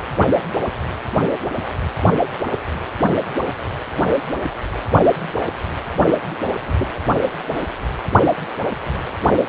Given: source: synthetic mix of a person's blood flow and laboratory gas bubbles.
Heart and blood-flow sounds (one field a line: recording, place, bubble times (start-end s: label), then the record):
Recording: Doppler ultrasound of blood flow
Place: precordium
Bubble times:
6.67-6.74 s: bubbles
6.79-6.92 s: bubbles
From the record:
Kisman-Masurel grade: 111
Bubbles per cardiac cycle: 1 to 2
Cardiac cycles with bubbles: 1 to 10%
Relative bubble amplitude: barely perceptible (0.100 to 0.250)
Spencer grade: 1 (occasional bubble signal discernible with the cardiac motion signal, with majority of cardiac periods free of bubbles)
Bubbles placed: only in the low amplitude regions of the cardiac cycle